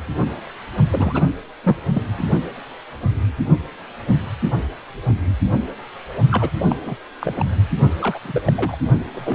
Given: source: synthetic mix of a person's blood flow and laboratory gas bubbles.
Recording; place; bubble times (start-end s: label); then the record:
Doppler ultrasound of blood flow; precordium
0.90-1.28 s: bubbles
1.63-1.76 s: bubbles
1.94-2.03 s: bubbles
2.18-2.24 s: bubbles
6.31-6.50 s: bubbles
6.58-6.66 s: bubbles
6.69-6.77 s: bubbles
6.81-6.99 s: bubbles
7.21-7.46 s: bubbles
8.00-8.19 s: bubbles
8.25-8.41 s: bubbles
8.47-8.53 s: bubbles
8.55-8.77 s: bubbles
9.12-9.35 s: bubbles
From the record:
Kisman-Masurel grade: 332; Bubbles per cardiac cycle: rolling drumbeat, 9 or more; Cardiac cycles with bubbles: 50 to 99%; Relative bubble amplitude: moderate (0.250 to 0.450); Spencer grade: 3 (all of the cardiac periods contain showers or single bubble signals, but not dominating or overriding the cardiac motion signals); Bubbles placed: only in the low amplitude regions of the cardiac cycle